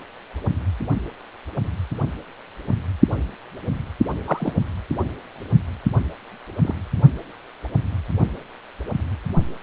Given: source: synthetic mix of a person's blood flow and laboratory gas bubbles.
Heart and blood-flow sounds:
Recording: Doppler ultrasound of blood flow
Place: precordium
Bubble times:
4.26-4.54 s: bubbles
6.63-6.75 s: bubbles
From the record:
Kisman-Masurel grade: 122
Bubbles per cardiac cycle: 1 to 2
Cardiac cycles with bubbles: 10 to 50%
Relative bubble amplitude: moderate (0.250 to 0.450)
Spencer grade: 2 (many but less than half of the cardiac periods contain bubble signals, singularly or in groups)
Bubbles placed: only in the low amplitude regions of the cardiac cycle

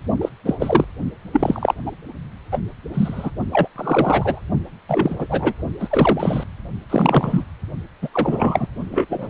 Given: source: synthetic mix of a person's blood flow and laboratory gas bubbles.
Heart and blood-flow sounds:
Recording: Doppler ultrasound of blood flow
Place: precordium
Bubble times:
0.21-0.29 s: bubbles
0.46-0.55 s: bubbles
0.59-0.84 s: bubbles
1.32-1.74 s: bubbles
1.86-1.92 s: bubbles
2.52-2.59 s: bubbles
2.94-3.31 s: bubbles
3.52-3.67 s: bubbles
3.75-4.41 s: bubbles
4.88-5.16 s: bubbles
5.18-5.53 s: bubbles
5.79-6.43 s: bubbles
6.89-7.44 s: bubbles
8.02-8.09 s: bubbles
8.12-8.67 s: bubbles
8.91-9.30 s: bubbles
From the record:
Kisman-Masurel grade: 243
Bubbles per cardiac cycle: several, 3 to 8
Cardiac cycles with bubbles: 100%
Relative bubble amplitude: loud (0.450 to 0.775)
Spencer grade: 3 (all of the cardiac periods contain showers or single bubble signals, but not dominating or overriding the cardiac motion signals)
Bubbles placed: only in the low amplitude regions of the cardiac cycle

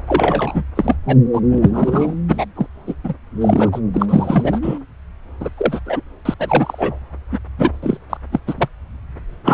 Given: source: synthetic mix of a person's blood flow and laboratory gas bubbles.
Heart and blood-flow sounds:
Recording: Doppler ultrasound of blood flow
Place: subclavian vein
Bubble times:
0.07-0.65 s: bubbles
0.75-0.96 s: bubbles
1.06-1.18 s: bubbles
1.33-1.41 s: bubbles
1.50-2.16 s: bubbles
2.28-2.45 s: bubbles
2.55-2.67 s: bubbles
2.87-2.95 s: bubbles
3.04-3.14 s: bubbles
3.41-3.80 s: bubbles
3.93-4.06 s: bubbles
4.08-4.79 s: bubbles
5.39-5.50 s: bubbles
5.57-5.80 s: bubbles
5.85-6.02 s: bubbles
6.25-6.34 s: bubbles
6.39-6.97 s: bubbles
7.31-7.38 s: bubbles
7.58-7.71 s: bubbles
7.82-7.97 s: bubbles
8.09-8.17 s: bubbles
8.31-8.39 s: bubbles
8.46-8.54 s: bubbles
8.57-8.68 s: bubbles
9.45-9.54 s: bubbles
From the record:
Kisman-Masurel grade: 343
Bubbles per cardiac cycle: rolling drumbeat, 9 or more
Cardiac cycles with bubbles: 100%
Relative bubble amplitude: loud (0.450 to 0.775)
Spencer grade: 3 (all of the cardiac periods contain showers or single bubble signals, but not dominating or overriding the cardiac motion signals)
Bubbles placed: anywhere in the cardiac cycle

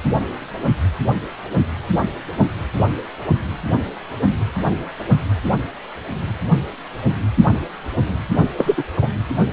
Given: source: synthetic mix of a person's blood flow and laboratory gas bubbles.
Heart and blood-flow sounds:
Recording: Doppler ultrasound of blood flow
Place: precordium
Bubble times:
8.57-8.74 s: bubbles
8.77-8.83 s: bubbles
9.02-9.09 s: bubbles
From the record:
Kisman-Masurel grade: 213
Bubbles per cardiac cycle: several, 3 to 8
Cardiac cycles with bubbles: 1 to 10%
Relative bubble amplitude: loud (0.450 to 0.775)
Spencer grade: 1 (occasional bubble signal discernible with the cardiac motion signal, with majority of cardiac periods free of bubbles)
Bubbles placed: anywhere in the cardiac cycle

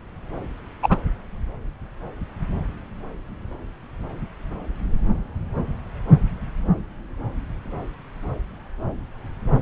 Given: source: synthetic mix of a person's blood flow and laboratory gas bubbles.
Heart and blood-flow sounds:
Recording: Doppler ultrasound of blood flow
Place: subclavian vein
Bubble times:
0.82-0.97 s: bubbles
From the record:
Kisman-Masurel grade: 113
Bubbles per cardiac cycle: 1 to 2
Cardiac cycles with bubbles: 1 to 10%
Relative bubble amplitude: loud (0.450 to 0.775)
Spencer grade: 1 (occasional bubble signal discernible with the cardiac motion signal, with majority of cardiac periods free of bubbles)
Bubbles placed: anywhere in the cardiac cycle

